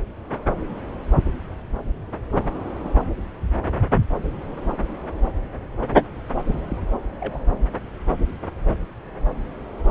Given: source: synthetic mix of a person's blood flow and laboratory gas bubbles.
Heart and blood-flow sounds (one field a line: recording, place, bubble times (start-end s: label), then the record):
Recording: Doppler ultrasound of blood flow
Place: subclavian vein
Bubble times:
2.84-2.89 s: bubbles
6.45-6.82 s: bubbles
7.20-7.39 s: bubbles
From the record:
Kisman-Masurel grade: 121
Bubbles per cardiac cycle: 1 to 2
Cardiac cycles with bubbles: 10 to 50%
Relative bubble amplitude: barely perceptible (0.100 to 0.250)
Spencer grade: 2 (many but less than half of the cardiac periods contain bubble signals, singularly or in groups)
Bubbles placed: anywhere in the cardiac cycle